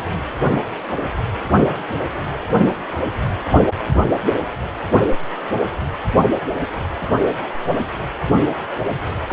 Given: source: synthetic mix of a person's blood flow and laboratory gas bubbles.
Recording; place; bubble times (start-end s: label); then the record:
Doppler ultrasound of blood flow; precordium
9.28-9.33 s: bubbles
From the record:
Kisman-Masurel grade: 112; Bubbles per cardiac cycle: 1 to 2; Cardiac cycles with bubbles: 1 to 10%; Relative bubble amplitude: moderate (0.250 to 0.450); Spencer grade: 1 (occasional bubble signal discernible with the cardiac motion signal, with majority of cardiac periods free of bubbles); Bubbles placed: anywhere in the cardiac cycle